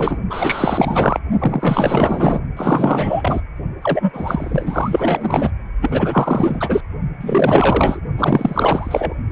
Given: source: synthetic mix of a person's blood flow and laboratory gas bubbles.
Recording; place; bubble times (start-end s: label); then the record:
Doppler ultrasound of blood flow; precordium
0.00-0.17 s: bubbles
0.30-1.19 s: bubbles
1.39-2.40 s: bubbles
2.57-3.41 s: bubbles
3.82-4.11 s: bubbles
4.13-5.50 s: bubbles
5.81-6.81 s: bubbles
7.21-8.01 s: bubbles
8.18-9.14 s: bubbles
9.29-9.32 s: bubbles
From the record:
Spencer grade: 4 (maximum detectable bubble signal sounding continuously throughout systole and diastole of every cardiac period, and overriding the amplitude of the normal cardiac signals); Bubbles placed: only in the low amplitude regions of the cardiac cycle